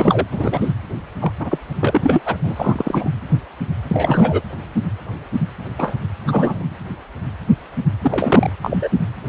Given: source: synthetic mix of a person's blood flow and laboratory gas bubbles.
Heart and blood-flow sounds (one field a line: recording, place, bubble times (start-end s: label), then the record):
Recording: Doppler ultrasound of blood flow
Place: precordium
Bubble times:
0.00-0.26 s: bubbles
0.31-0.72 s: bubbles
1.21-1.32 s: bubbles
1.40-1.58 s: bubbles
1.80-2.21 s: bubbles
2.25-2.36 s: bubbles
2.42-3.10 s: bubbles
3.89-4.41 s: bubbles
5.79-5.94 s: bubbles
6.27-6.63 s: bubbles
8.01-8.50 s: bubbles
8.62-8.89 s: bubbles
9.27-9.29 s: bubbles
From the record:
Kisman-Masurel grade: 232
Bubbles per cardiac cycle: several, 3 to 8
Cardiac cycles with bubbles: 50 to 99%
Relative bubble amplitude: moderate (0.250 to 0.450)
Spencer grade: 3 (all of the cardiac periods contain showers or single bubble signals, but not dominating or overriding the cardiac motion signals)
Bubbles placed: anywhere in the cardiac cycle